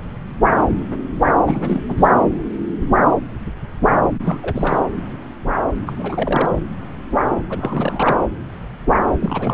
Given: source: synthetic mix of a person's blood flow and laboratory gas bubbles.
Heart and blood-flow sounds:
Doppler ultrasound of blood flow; subclavian vein
1.46-1.82 s: bubbles
1.89-2.13 s: bubbles
2.17-2.24 s: bubbles
4.25-4.39 s: bubbles
4.42-4.80 s: bubbles
5.86-5.92 s: bubbles
5.96-6.50 s: bubbles
6.56-6.62 s: bubbles
7.50-8.21 s: bubbles
9.19-9.54 s: bubbles
From the record:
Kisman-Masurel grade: 332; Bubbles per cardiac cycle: rolling drumbeat, 9 or more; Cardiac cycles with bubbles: 50 to 99%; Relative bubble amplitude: moderate (0.250 to 0.450); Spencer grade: 3 (all of the cardiac periods contain showers or single bubble signals, but not dominating or overriding the cardiac motion signals); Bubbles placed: anywhere in the cardiac cycle

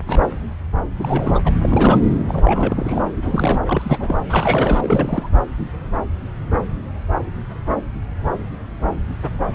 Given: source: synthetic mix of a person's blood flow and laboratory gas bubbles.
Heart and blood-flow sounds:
Doppler ultrasound of blood flow; subclavian vein
0.00-0.02 s: bubbles
0.06-0.20 s: bubbles
0.99-1.42 s: bubbles
1.45-1.52 s: bubbles
1.62-1.99 s: bubbles
2.28-3.02 s: bubbles
3.16-3.59 s: bubbles
3.66-4.19 s: bubbles
4.29-5.29 s: bubbles
From the record:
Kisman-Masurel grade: 332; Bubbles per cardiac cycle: rolling drumbeat, 9 or more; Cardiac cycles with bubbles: 50 to 99%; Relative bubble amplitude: moderate (0.250 to 0.450); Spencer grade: 3 (all of the cardiac periods contain showers or single bubble signals, but not dominating or overriding the cardiac motion signals); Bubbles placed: anywhere in the cardiac cycle

